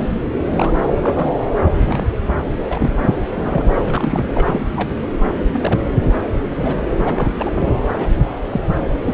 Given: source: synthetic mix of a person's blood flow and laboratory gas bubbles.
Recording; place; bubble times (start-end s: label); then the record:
Doppler ultrasound of blood flow; subclavian vein
0.00-0.71 s: bubbles
0.74-0.85 s: bubbles
0.88-1.29 s: bubbles
1.89-2.07 s: bubbles
2.34-2.50 s: bubbles
2.68-2.90 s: bubbles
2.97-3.15 s: bubbles
3.34-3.62 s: bubbles
3.79-4.25 s: bubbles
4.34-4.67 s: bubbles
4.75-4.92 s: bubbles
5.52-5.80 s: bubbles
6.50-6.83 s: bubbles
6.96-7.31 s: bubbles
7.38-7.73 s: bubbles
7.96-8.08 s: bubbles
8.49-8.61 s: bubbles
8.79-8.88 s: bubbles
8.93-9.14 s: bubbles
From the record:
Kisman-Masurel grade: 232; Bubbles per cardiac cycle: several, 3 to 8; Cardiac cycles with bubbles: 50 to 99%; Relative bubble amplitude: moderate (0.250 to 0.450); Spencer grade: 3 (all of the cardiac periods contain showers or single bubble signals, but not dominating or overriding the cardiac motion signals); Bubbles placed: anywhere in the cardiac cycle